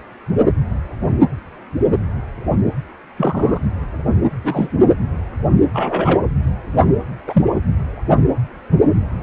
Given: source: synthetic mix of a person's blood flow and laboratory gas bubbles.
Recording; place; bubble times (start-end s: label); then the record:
Doppler ultrasound of blood flow; precordium
3.17-3.59 s: bubbles
4.44-4.69 s: bubbles
5.74-6.21 s: bubbles
7.27-7.42 s: bubbles
From the record:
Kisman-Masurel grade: 123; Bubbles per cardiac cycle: 1 to 2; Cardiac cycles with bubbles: 10 to 50%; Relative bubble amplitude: loud (0.450 to 0.775); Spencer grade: 2 (many but less than half of the cardiac periods contain bubble signals, singularly or in groups); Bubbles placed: anywhere in the cardiac cycle